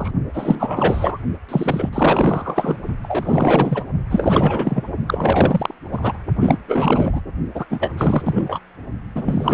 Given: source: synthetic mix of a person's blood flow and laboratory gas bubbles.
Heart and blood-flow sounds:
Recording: Doppler ultrasound of blood flow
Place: precordium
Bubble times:
0.00-0.11 s: bubbles
0.34-1.20 s: bubbles
1.49-1.90 s: bubbles
1.93-2.77 s: bubbles
3.02-3.87 s: bubbles
4.10-4.84 s: bubbles
5.07-5.75 s: bubbles
5.92-6.17 s: bubbles
6.40-6.58 s: bubbles
6.68-7.22 s: bubbles
7.54-7.66 s: bubbles
7.70-7.93 s: bubbles
7.97-8.21 s: bubbles
8.25-8.59 s: bubbles
9.16-9.54 s: bubbles
From the record:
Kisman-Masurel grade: 444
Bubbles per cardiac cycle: continuous sound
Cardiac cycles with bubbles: 100%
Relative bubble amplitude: maximal (0.775 to 0.999)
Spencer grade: 4 (maximum detectable bubble signal sounding continuously throughout systole and diastole of every cardiac period, and overriding the amplitude of the normal cardiac signals)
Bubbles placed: only in the low amplitude regions of the cardiac cycle

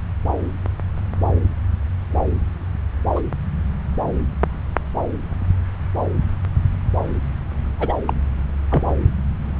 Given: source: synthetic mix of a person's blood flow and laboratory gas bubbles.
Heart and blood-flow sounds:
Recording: Doppler ultrasound of blood flow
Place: subclavian vein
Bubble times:
3.15-3.21 s: bubbles
7.79-7.93 s: bubbles
8.06-8.13 s: bubbles
8.70-8.83 s: bubbles
From the record:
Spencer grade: 2 (many but less than half of the cardiac periods contain bubble signals, singularly or in groups)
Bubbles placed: anywhere in the cardiac cycle

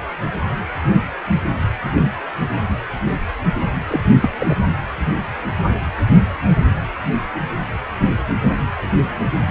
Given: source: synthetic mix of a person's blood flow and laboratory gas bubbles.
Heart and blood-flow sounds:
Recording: Doppler ultrasound of blood flow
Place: precordium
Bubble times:
3.88-4.00 s: bubbles
4.21-4.30 s: bubbles
4.39-4.55 s: bubbles
From the record:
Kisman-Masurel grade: 212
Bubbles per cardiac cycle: several, 3 to 8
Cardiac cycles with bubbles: 1 to 10%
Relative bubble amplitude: moderate (0.250 to 0.450)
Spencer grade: 1 (occasional bubble signal discernible with the cardiac motion signal, with majority of cardiac periods free of bubbles)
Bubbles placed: anywhere in the cardiac cycle

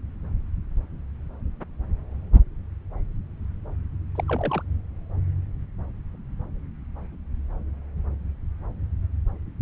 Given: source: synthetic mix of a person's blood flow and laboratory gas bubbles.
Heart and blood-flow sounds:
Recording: Doppler ultrasound of blood flow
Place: subclavian vein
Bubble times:
4.15-4.24 s: bubbles
4.28-4.62 s: bubbles
From the record:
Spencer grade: 1 (occasional bubble signal discernible with the cardiac motion signal, with majority of cardiac periods free of bubbles)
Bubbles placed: anywhere in the cardiac cycle

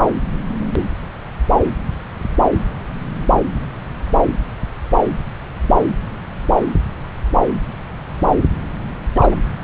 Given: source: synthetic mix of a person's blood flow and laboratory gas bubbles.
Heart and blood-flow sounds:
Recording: Doppler ultrasound of blood flow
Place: subclavian vein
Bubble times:
9.14-9.36 s: bubbles
From the record:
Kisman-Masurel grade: 112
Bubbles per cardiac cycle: 1 to 2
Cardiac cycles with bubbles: 1 to 10%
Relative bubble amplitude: moderate (0.250 to 0.450)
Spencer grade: 1 (occasional bubble signal discernible with the cardiac motion signal, with majority of cardiac periods free of bubbles)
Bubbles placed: anywhere in the cardiac cycle

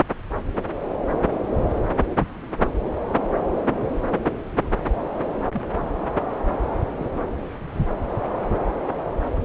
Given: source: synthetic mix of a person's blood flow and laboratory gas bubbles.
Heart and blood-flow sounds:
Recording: Doppler ultrasound of blood flow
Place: subclavian vein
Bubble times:
4.63-4.68 s: bubbles
5.51-5.62 s: bubbles
6.89-7.05 s: bubbles
From the record:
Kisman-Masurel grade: 121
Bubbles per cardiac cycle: 1 to 2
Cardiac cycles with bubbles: 10 to 50%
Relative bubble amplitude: barely perceptible (0.100 to 0.250)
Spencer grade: 2 (many but less than half of the cardiac periods contain bubble signals, singularly or in groups)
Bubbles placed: anywhere in the cardiac cycle

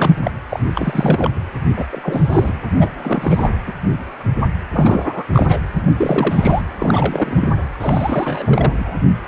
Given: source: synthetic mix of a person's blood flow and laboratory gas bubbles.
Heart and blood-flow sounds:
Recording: Doppler ultrasound of blood flow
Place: precordium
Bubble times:
0.00-0.15 s: bubbles
0.23-0.31 s: bubbles
0.48-0.59 s: bubbles
0.75-1.30 s: bubbles
1.76-1.84 s: bubbles
1.92-2.62 s: bubbles
2.79-2.92 s: bubbles
3.03-3.50 s: bubbles
3.67-3.74 s: bubbles
4.72-5.23 s: bubbles
5.33-5.60 s: bubbles
5.96-6.62 s: bubbles
6.78-7.49 s: bubbles
7.80-8.73 s: bubbles
8.76-8.99 s: bubbles
From the record:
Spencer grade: 3 (all of the cardiac periods contain showers or single bubble signals, but not dominating or overriding the cardiac motion signals)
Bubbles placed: anywhere in the cardiac cycle

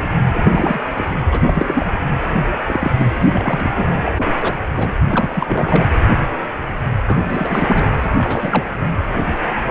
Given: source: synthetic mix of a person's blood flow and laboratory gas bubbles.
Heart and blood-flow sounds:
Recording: Doppler ultrasound of blood flow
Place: precordium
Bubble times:
0.35-0.80 s: bubbles
0.96-1.04 s: bubbles
1.31-1.40 s: bubbles
1.44-1.86 s: bubbles
2.11-2.19 s: bubbles
2.68-2.92 s: bubbles
2.97-3.10 s: bubbles
3.32-4.10 s: bubbles
4.17-4.33 s: bubbles
4.42-4.54 s: bubbles
4.75-4.95 s: bubbles
5.08-5.88 s: bubbles
7.06-7.24 s: bubbles
7.29-7.88 s: bubbles
8.03-8.10 s: bubbles
8.18-8.65 s: bubbles
From the record:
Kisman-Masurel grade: 332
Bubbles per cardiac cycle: rolling drumbeat, 9 or more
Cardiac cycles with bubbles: 50 to 99%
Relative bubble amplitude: moderate (0.250 to 0.450)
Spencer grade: 3 (all of the cardiac periods contain showers or single bubble signals, but not dominating or overriding the cardiac motion signals)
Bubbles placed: anywhere in the cardiac cycle

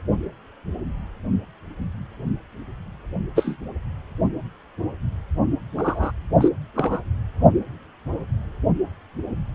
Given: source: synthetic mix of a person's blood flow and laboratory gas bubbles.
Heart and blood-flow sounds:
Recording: Doppler ultrasound of blood flow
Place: precordium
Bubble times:
3.35-3.56 s: bubbles
5.77-6.11 s: bubbles
6.40-6.48 s: bubbles
6.75-7.02 s: bubbles
From the record:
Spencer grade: 2 (many but less than half of the cardiac periods contain bubble signals, singularly or in groups)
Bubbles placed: only in the low amplitude regions of the cardiac cycle

